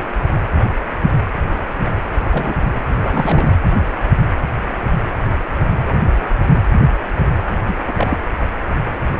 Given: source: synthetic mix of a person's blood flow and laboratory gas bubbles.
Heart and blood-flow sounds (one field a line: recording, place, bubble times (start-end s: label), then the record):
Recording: Doppler ultrasound of blood flow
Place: precordium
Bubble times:
2.25-2.54 s: bubbles
2.94-3.57 s: bubbles
7.68-7.76 s: bubbles
7.86-7.94 s: bubbles
7.97-8.18 s: bubbles
From the record:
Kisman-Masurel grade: 222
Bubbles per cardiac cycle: several, 3 to 8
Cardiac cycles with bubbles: 10 to 50%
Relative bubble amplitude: moderate (0.250 to 0.450)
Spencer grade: 2 (many but less than half of the cardiac periods contain bubble signals, singularly or in groups)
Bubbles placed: anywhere in the cardiac cycle